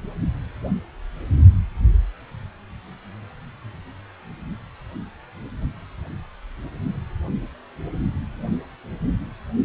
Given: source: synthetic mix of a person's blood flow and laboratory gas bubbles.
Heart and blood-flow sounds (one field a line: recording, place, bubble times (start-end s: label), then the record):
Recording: Doppler ultrasound of blood flow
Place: precordium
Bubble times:
no bubbles
From the record:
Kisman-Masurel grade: 000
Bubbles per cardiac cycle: 0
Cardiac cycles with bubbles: 0%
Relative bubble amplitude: no bubbles discernible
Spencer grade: 0 (complete lack of bubble signals)